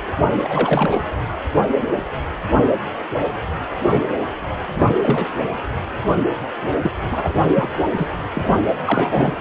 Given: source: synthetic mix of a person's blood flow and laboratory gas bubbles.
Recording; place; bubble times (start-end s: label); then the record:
Doppler ultrasound of blood flow; precordium
0.43-1.03 s: bubbles
4.75-4.97 s: bubbles
5.00-5.27 s: bubbles
6.82-6.92 s: bubbles
7.11-7.33 s: bubbles
7.55-7.70 s: bubbles
7.96-8.11 s: bubbles
8.34-8.44 s: bubbles
8.85-9.36 s: bubbles
From the record:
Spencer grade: 3 (all of the cardiac periods contain showers or single bubble signals, but not dominating or overriding the cardiac motion signals); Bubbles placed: anywhere in the cardiac cycle